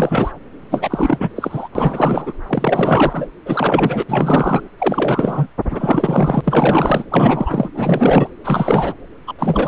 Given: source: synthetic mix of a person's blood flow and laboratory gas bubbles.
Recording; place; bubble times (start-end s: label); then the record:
Doppler ultrasound of blood flow; subclavian vein
0.00-0.31 s: bubbles
0.69-1.29 s: bubbles
1.35-1.69 s: bubbles
1.75-2.33 s: bubbles
2.47-3.29 s: bubbles
3.45-4.04 s: bubbles
4.08-4.69 s: bubbles
4.78-5.47 s: bubbles
5.70-6.41 s: bubbles
6.44-7.04 s: bubbles
7.11-7.70 s: bubbles
7.75-8.29 s: bubbles
8.44-8.94 s: bubbles
9.27-9.34 s: bubbles
9.38-9.68 s: bubbles
From the record:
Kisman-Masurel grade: 444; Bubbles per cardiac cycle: continuous sound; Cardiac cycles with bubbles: 100%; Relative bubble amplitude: maximal (0.775 to 0.999); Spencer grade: 4 (maximum detectable bubble signal sounding continuously throughout systole and diastole of every cardiac period, and overriding the amplitude of the normal cardiac signals); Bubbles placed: anywhere in the cardiac cycle